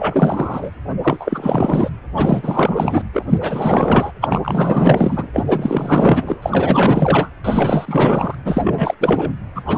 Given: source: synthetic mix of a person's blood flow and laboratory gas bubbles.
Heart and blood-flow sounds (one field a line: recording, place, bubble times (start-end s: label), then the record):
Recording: Doppler ultrasound of blood flow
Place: precordium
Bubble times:
0.00-0.70 s: bubbles
1.03-1.90 s: bubbles
2.16-3.04 s: bubbles
3.13-3.26 s: bubbles
3.29-4.11 s: bubbles
4.21-5.28 s: bubbles
5.32-6.39 s: bubbles
6.42-7.28 s: bubbles
7.44-8.35 s: bubbles
8.45-8.95 s: bubbles
9.01-9.32 s: bubbles
9.55-9.62 s: bubbles
9.66-9.77 s: bubbles
From the record:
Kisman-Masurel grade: 444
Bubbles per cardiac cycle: continuous sound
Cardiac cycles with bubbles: 100%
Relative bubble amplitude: maximal (0.775 to 0.999)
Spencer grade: 4 (maximum detectable bubble signal sounding continuously throughout systole and diastole of every cardiac period, and overriding the amplitude of the normal cardiac signals)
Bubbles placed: anywhere in the cardiac cycle